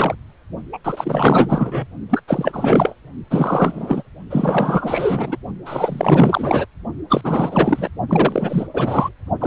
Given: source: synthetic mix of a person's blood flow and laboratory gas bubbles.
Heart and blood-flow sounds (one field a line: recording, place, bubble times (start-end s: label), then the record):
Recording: Doppler ultrasound of blood flow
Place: precordium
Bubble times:
0.00-0.15 s: bubbles
0.72-0.78 s: bubbles
0.84-1.88 s: bubbles
2.10-2.21 s: bubbles
2.27-2.95 s: bubbles
3.30-4.03 s: bubbles
4.30-5.37 s: bubbles
5.65-6.66 s: bubbles
7.10-7.21 s: bubbles
7.23-7.88 s: bubbles
8.09-8.67 s: bubbles
8.74-9.12 s: bubbles
9.39-9.47 s: bubbles
From the record:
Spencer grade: 4 (maximum detectable bubble signal sounding continuously throughout systole and diastole of every cardiac period, and overriding the amplitude of the normal cardiac signals)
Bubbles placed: only in the low amplitude regions of the cardiac cycle